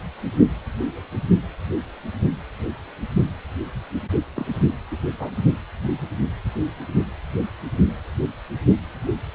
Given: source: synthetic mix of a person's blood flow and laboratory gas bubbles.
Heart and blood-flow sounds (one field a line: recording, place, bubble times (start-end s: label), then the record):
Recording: Doppler ultrasound of blood flow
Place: precordium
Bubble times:
4.34-4.65 s: bubbles
4.91-4.96 s: bubbles
5.19-5.31 s: bubbles
From the record:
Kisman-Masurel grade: 221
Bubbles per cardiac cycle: several, 3 to 8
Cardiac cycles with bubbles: 10 to 50%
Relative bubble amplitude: barely perceptible (0.100 to 0.250)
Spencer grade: 2 (many but less than half of the cardiac periods contain bubble signals, singularly or in groups)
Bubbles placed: only in the low amplitude regions of the cardiac cycle